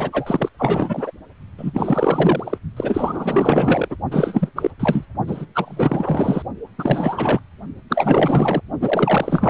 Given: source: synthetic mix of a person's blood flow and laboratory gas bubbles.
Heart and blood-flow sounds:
Doppler ultrasound of blood flow; precordium
0.00-0.49 s: bubbles
0.58-1.11 s: bubbles
1.58-2.58 s: bubbles
2.76-3.96 s: bubbles
4.11-4.49 s: bubbles
4.56-4.71 s: bubbles
4.79-5.06 s: bubbles
5.27-5.46 s: bubbles
5.54-6.43 s: bubbles
6.78-7.40 s: bubbles
7.89-8.61 s: bubbles
8.80-9.50 s: bubbles
From the record:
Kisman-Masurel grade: 444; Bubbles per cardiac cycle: continuous sound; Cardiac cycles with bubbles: 100%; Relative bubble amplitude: maximal (0.775 to 0.999); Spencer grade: 4 (maximum detectable bubble signal sounding continuously throughout systole and diastole of every cardiac period, and overriding the amplitude of the normal cardiac signals); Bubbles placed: only in the low amplitude regions of the cardiac cycle

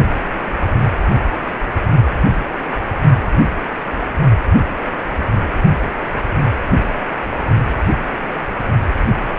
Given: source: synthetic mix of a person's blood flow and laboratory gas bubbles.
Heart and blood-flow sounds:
Doppler ultrasound of blood flow; precordium
1.29-1.33 s: bubbles
From the record:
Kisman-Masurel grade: 111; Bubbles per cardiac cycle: 1 to 2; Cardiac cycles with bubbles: 1 to 10%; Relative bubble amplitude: barely perceptible (0.100 to 0.250); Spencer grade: 1 (occasional bubble signal discernible with the cardiac motion signal, with majority of cardiac periods free of bubbles); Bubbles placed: only in the low amplitude regions of the cardiac cycle

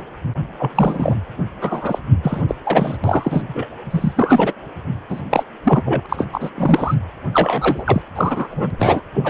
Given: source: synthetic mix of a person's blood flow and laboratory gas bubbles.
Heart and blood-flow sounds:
Doppler ultrasound of blood flow; precordium
0.00-0.03 s: bubbles
0.57-1.16 s: bubbles
1.61-1.99 s: bubbles
2.22-2.42 s: bubbles
2.48-2.55 s: bubbles
2.63-2.97 s: bubbles
3.04-3.44 s: bubbles
3.48-3.67 s: bubbles
3.90-4.53 s: bubbles
5.09-5.22 s: bubbles
5.30-5.43 s: bubbles
5.63-5.83 s: bubbles
5.85-6.06 s: bubbles
6.08-6.25 s: bubbles
6.33-6.50 s: bubbles
6.56-6.95 s: bubbles
7.33-8.02 s: bubbles
8.15-8.47 s: bubbles
8.50-8.71 s: bubbles
8.79-9.02 s: bubbles
9.13-9.30 s: bubbles
From the record:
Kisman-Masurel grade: 343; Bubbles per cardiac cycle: rolling drumbeat, 9 or more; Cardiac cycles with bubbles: 100%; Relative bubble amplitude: loud (0.450 to 0.775); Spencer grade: 3 (all of the cardiac periods contain showers or single bubble signals, but not dominating or overriding the cardiac motion signals); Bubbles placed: anywhere in the cardiac cycle

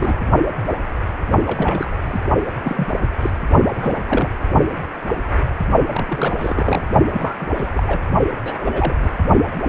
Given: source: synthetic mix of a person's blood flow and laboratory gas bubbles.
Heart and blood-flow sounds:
Doppler ultrasound of blood flow; precordium
0.00-0.18 s: bubbles
1.46-1.90 s: bubbles
2.04-2.19 s: bubbles
2.47-2.51 s: bubbles
2.62-2.88 s: bubbles
3.21-3.30 s: bubbles
3.65-3.71 s: bubbles
3.74-4.00 s: bubbles
4.07-4.29 s: bubbles
5.90-6.34 s: bubbles
6.38-6.86 s: bubbles
7.13-7.36 s: bubbles
7.41-7.47 s: bubbles
7.54-8.00 s: bubbles
8.45-8.95 s: bubbles
9.02-9.10 s: bubbles
From the record:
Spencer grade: 3 (all of the cardiac periods contain showers or single bubble signals, but not dominating or overriding the cardiac motion signals); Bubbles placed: only in the low amplitude regions of the cardiac cycle

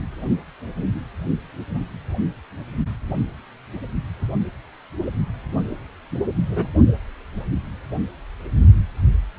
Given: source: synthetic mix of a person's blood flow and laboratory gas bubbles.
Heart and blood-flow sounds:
Doppler ultrasound of blood flow; precordium
6.49-6.67 s: bubbles
From the record:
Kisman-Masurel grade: 111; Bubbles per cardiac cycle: 1 to 2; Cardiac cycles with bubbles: 1 to 10%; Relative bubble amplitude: barely perceptible (0.100 to 0.250); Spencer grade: 1 (occasional bubble signal discernible with the cardiac motion signal, with majority of cardiac periods free of bubbles); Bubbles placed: only in the low amplitude regions of the cardiac cycle

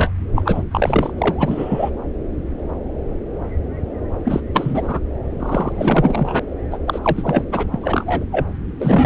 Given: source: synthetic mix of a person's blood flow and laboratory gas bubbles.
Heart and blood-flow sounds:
Doppler ultrasound of blood flow; subclavian vein
0.00-0.10 s: bubbles
0.34-0.43 s: bubbles
0.45-0.64 s: bubbles
0.71-1.11 s: bubbles
1.18-1.90 s: bubbles
4.25-4.40 s: bubbles
4.54-4.99 s: bubbles
5.39-6.39 s: bubbles
6.71-6.78 s: bubbles
6.87-6.99 s: bubbles
7.03-7.43 s: bubbles
7.52-7.67 s: bubbles
7.71-8.24 s: bubbles
8.31-8.45 s: bubbles
8.79-9.05 s: bubbles
From the record:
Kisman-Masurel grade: 333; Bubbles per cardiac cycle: rolling drumbeat, 9 or more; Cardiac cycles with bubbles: 50 to 99%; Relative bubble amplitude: loud (0.450 to 0.775); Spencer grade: 3 (all of the cardiac periods contain showers or single bubble signals, but not dominating or overriding the cardiac motion signals); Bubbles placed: anywhere in the cardiac cycle

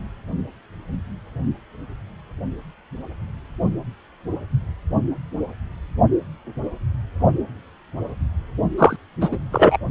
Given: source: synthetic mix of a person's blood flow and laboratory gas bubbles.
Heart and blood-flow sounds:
Doppler ultrasound of blood flow; precordium
8.78-8.96 s: bubbles
9.21-9.29 s: bubbles
9.32-9.37 s: bubbles
9.52-9.78 s: bubbles
From the record:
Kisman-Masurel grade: 213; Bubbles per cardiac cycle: several, 3 to 8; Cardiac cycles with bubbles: 1 to 10%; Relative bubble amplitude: loud (0.450 to 0.775); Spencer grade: 1 (occasional bubble signal discernible with the cardiac motion signal, with majority of cardiac periods free of bubbles); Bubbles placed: only in the low amplitude regions of the cardiac cycle

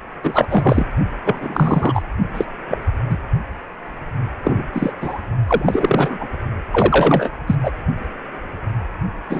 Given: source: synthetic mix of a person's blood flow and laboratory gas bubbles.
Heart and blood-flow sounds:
Doppler ultrasound of blood flow; precordium
0.23-0.86 s: bubbles
1.24-2.02 s: bubbles
2.34-2.46 s: bubbles
2.68-2.82 s: bubbles
3.10-3.18 s: bubbles
4.43-4.65 s: bubbles
4.72-4.92 s: bubbles
5.00-5.21 s: bubbles
5.47-6.17 s: bubbles
6.20-6.28 s: bubbles
6.72-7.30 s: bubbles
7.46-7.55 s: bubbles
7.63-7.71 s: bubbles
9.29-9.40 s: bubbles
From the record:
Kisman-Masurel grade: 243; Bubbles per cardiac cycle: several, 3 to 8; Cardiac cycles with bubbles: 100%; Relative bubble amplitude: loud (0.450 to 0.775); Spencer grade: 3 (all of the cardiac periods contain showers or single bubble signals, but not dominating or overriding the cardiac motion signals); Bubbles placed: only in the low amplitude regions of the cardiac cycle

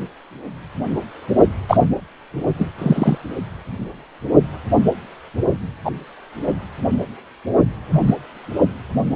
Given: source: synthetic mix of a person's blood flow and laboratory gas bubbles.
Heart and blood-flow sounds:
Doppler ultrasound of blood flow; precordium
1.68-1.77 s: bubbles
2.58-2.66 s: bubbles
2.78-3.18 s: bubbles
5.84-5.92 s: bubbles
7.91-8.14 s: bubbles
From the record:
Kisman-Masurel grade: 123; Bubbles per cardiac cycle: 1 to 2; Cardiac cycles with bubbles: 10 to 50%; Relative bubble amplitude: loud (0.450 to 0.775); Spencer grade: 2 (many but less than half of the cardiac periods contain bubble signals, singularly or in groups); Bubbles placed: only in the low amplitude regions of the cardiac cycle

